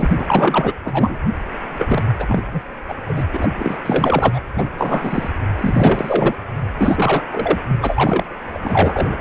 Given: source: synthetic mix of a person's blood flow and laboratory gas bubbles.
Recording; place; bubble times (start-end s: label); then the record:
Doppler ultrasound of blood flow; precordium
0.00-0.24 s: bubbles
0.27-0.74 s: bubbles
0.85-1.20 s: bubbles
1.78-2.04 s: bubbles
2.19-2.62 s: bubbles
2.88-2.95 s: bubbles
3.06-3.24 s: bubbles
3.33-3.49 s: bubbles
3.57-3.79 s: bubbles
3.85-4.41 s: bubbles
4.55-4.71 s: bubbles
4.78-5.30 s: bubbles
5.58-6.35 s: bubbles
6.77-7.22 s: bubbles
7.32-7.58 s: bubbles
7.67-8.23 s: bubbles
8.54-8.59 s: bubbles
8.63-9.16 s: bubbles
From the record:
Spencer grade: 4 (maximum detectable bubble signal sounding continuously throughout systole and diastole of every cardiac period, and overriding the amplitude of the normal cardiac signals); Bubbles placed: anywhere in the cardiac cycle